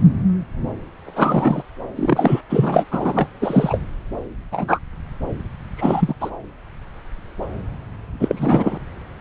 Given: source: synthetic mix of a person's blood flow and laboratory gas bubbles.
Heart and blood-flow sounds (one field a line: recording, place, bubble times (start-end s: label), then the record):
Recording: Doppler ultrasound of blood flow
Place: subclavian vein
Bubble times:
1.04-1.63 s: bubbles
1.95-2.41 s: bubbles
2.50-2.84 s: bubbles
2.91-3.28 s: bubbles
3.42-3.79 s: bubbles
4.51-4.79 s: bubbles
5.77-6.14 s: bubbles
6.20-6.30 s: bubbles
8.20-8.78 s: bubbles
From the record:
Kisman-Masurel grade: 233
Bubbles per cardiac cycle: several, 3 to 8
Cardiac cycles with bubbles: 50 to 99%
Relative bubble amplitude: loud (0.450 to 0.775)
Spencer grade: 3 (all of the cardiac periods contain showers or single bubble signals, but not dominating or overriding the cardiac motion signals)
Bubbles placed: anywhere in the cardiac cycle